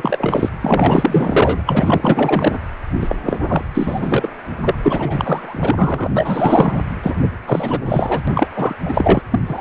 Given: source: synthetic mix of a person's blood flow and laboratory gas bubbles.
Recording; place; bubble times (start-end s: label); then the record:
Doppler ultrasound of blood flow; precordium
0.00-0.49 s: bubbles
0.61-1.62 s: bubbles
1.66-2.58 s: bubbles
3.00-3.15 s: bubbles
3.25-3.39 s: bubbles
3.47-3.65 s: bubbles
3.74-4.29 s: bubbles
4.58-4.75 s: bubbles
4.82-6.10 s: bubbles
6.16-6.80 s: bubbles
7.03-7.16 s: bubbles
7.22-7.28 s: bubbles
7.46-7.79 s: bubbles
7.86-8.21 s: bubbles
8.27-8.48 s: bubbles
8.56-8.75 s: bubbles
8.85-9.22 s: bubbles
9.31-9.40 s: bubbles
9.45-9.61 s: bubbles
From the record:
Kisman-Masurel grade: 444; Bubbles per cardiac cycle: continuous sound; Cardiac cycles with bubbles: 100%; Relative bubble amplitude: maximal (0.775 to 0.999); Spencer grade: 4 (maximum detectable bubble signal sounding continuously throughout systole and diastole of every cardiac period, and overriding the amplitude of the normal cardiac signals); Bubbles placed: anywhere in the cardiac cycle